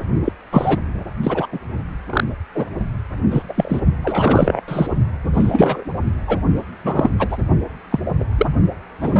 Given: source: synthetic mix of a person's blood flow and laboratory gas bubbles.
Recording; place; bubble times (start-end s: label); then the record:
Doppler ultrasound of blood flow; precordium
0.24-0.32 s: bubbles
0.52-0.80 s: bubbles
1.23-1.47 s: bubbles
1.52-1.60 s: bubbles
2.10-2.24 s: bubbles
2.54-2.65 s: bubbles
3.30-3.43 s: bubbles
3.48-3.81 s: bubbles
4.03-4.61 s: bubbles
4.68-4.87 s: bubbles
5.34-5.84 s: bubbles
6.27-6.40 s: bubbles
6.84-7.10 s: bubbles
7.18-7.37 s: bubbles
7.90-7.99 s: bubbles
8.20-8.24 s: bubbles
8.37-8.46 s: bubbles
9.01-9.20 s: bubbles
From the record:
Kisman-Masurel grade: 243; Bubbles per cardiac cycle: several, 3 to 8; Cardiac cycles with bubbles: 100%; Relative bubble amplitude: loud (0.450 to 0.775); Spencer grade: 3 (all of the cardiac periods contain showers or single bubble signals, but not dominating or overriding the cardiac motion signals); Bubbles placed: only in the low amplitude regions of the cardiac cycle